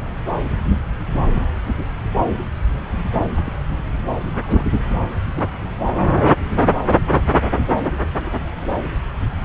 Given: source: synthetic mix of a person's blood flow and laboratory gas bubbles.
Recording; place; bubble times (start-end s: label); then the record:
Doppler ultrasound of blood flow; subclavian vein
0.67-0.76 s: bubbles
3.35-3.42 s: bubbles
3.45-3.54 s: bubbles
4.30-4.65 s: bubbles
4.90-5.09 s: bubbles
5.34-5.57 s: bubbles
6.03-6.21 s: bubbles
6.59-6.67 s: bubbles
7.55-7.62 s: bubbles
8.17-8.39 s: bubbles
From the record:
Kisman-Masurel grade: 121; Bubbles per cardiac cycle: 1 to 2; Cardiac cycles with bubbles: 10 to 50%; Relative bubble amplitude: barely perceptible (0.100 to 0.250); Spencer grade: 2 (many but less than half of the cardiac periods contain bubble signals, singularly or in groups); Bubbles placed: anywhere in the cardiac cycle